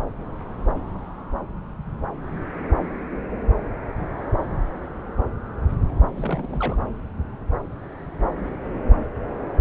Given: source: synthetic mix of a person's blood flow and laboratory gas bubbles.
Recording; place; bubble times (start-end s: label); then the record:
Doppler ultrasound of blood flow; subclavian vein
6.11-6.77 s: bubbles
9.55-9.61 s: bubbles
From the record:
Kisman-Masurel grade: 221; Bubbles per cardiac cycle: several, 3 to 8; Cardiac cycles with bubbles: 10 to 50%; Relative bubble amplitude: barely perceptible (0.100 to 0.250); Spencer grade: 2 (many but less than half of the cardiac periods contain bubble signals, singularly or in groups); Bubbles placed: anywhere in the cardiac cycle